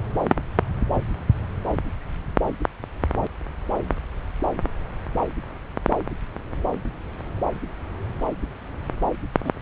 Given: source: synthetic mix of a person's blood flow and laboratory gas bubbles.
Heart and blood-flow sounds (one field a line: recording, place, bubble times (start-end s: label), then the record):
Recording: Doppler ultrasound of blood flow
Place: subclavian vein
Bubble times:
9.44-9.52 s: bubbles
From the record:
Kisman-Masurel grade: 112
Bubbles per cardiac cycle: 1 to 2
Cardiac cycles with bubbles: 1 to 10%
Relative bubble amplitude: moderate (0.250 to 0.450)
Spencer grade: 1 (occasional bubble signal discernible with the cardiac motion signal, with majority of cardiac periods free of bubbles)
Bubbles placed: anywhere in the cardiac cycle